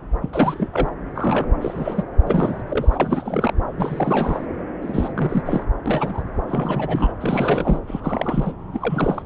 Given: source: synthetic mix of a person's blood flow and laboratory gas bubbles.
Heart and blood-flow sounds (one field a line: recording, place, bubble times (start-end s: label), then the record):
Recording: Doppler ultrasound of blood flow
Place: subclavian vein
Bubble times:
0.21-0.29 s: bubbles
0.32-0.69 s: bubbles
0.72-0.89 s: bubbles
1.15-1.47 s: bubbles
1.61-2.04 s: bubbles
2.27-2.62 s: bubbles
2.67-3.52 s: bubbles
3.77-4.47 s: bubbles
4.81-5.64 s: bubbles
5.86-6.24 s: bubbles
6.47-7.12 s: bubbles
7.21-7.80 s: bubbles
7.87-8.53 s: bubbles
8.72-9.22 s: bubbles
From the record:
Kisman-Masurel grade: 332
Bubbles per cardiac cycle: rolling drumbeat, 9 or more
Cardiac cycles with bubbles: 50 to 99%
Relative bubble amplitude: moderate (0.250 to 0.450)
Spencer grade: 3 (all of the cardiac periods contain showers or single bubble signals, but not dominating or overriding the cardiac motion signals)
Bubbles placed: anywhere in the cardiac cycle